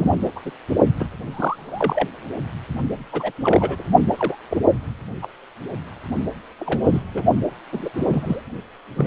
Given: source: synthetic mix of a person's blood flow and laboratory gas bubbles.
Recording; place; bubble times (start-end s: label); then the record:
Doppler ultrasound of blood flow; precordium
0.00-0.31 s: bubbles
0.35-0.40 s: bubbles
0.45-0.51 s: bubbles
0.99-1.08 s: bubbles
1.31-2.08 s: bubbles
3.12-3.32 s: bubbles
3.42-3.83 s: bubbles
4.17-4.37 s: bubbles
4.50-4.57 s: bubbles
5.22-5.26 s: bubbles
6.59-6.79 s: bubbles
6.83-7.03 s: bubbles
7.14-7.23 s: bubbles
7.72-7.89 s: bubbles
7.94-8.42 s: bubbles
8.96-9.07 s: bubbles
From the record:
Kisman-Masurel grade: 242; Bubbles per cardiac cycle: several, 3 to 8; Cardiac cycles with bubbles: 100%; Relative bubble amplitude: moderate (0.250 to 0.450); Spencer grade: 3 (all of the cardiac periods contain showers or single bubble signals, but not dominating or overriding the cardiac motion signals); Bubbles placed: only in the low amplitude regions of the cardiac cycle